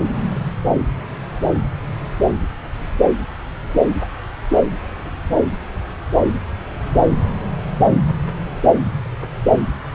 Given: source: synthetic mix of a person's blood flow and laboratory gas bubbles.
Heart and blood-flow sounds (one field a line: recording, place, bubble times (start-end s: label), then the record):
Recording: Doppler ultrasound of blood flow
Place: subclavian vein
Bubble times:
no bubbles
From the record:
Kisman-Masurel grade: 000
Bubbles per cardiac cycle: 0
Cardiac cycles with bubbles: 0%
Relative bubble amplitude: no bubbles discernible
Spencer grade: 0 (complete lack of bubble signals)